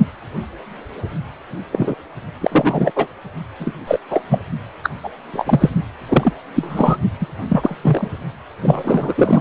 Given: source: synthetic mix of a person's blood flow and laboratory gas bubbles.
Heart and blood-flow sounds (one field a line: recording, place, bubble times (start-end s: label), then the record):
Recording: Doppler ultrasound of blood flow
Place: precordium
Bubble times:
1.71-1.95 s: bubbles
2.42-2.92 s: bubbles
2.96-3.07 s: bubbles
3.60-3.74 s: bubbles
3.87-3.99 s: bubbles
4.10-4.23 s: bubbles
4.29-4.39 s: bubbles
4.83-4.90 s: bubbles
5.03-5.10 s: bubbles
5.33-5.70 s: bubbles
6.06-6.35 s: bubbles
6.55-6.97 s: bubbles
7.20-7.26 s: bubbles
7.49-7.76 s: bubbles
7.83-8.08 s: bubbles
8.61-9.41 s: bubbles
From the record:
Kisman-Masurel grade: 233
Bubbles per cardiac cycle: several, 3 to 8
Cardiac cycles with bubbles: 50 to 99%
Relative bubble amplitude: loud (0.450 to 0.775)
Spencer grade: 3 (all of the cardiac periods contain showers or single bubble signals, but not dominating or overriding the cardiac motion signals)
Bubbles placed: only in the low amplitude regions of the cardiac cycle